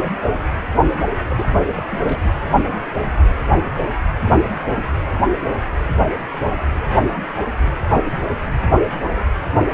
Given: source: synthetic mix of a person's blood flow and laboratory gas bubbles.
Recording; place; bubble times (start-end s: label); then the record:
Doppler ultrasound of blood flow; precordium
1.30-1.57 s: bubbles
1.77-1.83 s: bubbles
1.92-2.00 s: bubbles
2.03-2.40 s: bubbles
From the record:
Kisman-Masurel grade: 211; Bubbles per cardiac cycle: several, 3 to 8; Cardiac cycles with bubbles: 1 to 10%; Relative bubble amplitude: barely perceptible (0.100 to 0.250); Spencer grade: 1 (occasional bubble signal discernible with the cardiac motion signal, with majority of cardiac periods free of bubbles); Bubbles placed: anywhere in the cardiac cycle